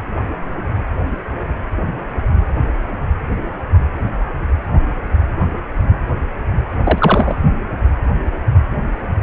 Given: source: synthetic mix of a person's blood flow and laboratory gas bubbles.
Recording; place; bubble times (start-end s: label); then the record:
Doppler ultrasound of blood flow; precordium
6.83-7.36 s: bubbles
From the record:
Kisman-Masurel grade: 213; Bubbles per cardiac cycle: several, 3 to 8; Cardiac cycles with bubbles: 1 to 10%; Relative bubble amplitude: loud (0.450 to 0.775); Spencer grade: 1 (occasional bubble signal discernible with the cardiac motion signal, with majority of cardiac periods free of bubbles); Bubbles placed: anywhere in the cardiac cycle